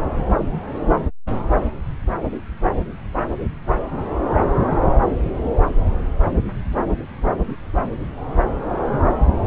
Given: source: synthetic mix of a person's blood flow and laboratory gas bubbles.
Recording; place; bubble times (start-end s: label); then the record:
Doppler ultrasound of blood flow; subclavian vein
no bubbles
From the record:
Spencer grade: 0 (complete lack of bubble signals)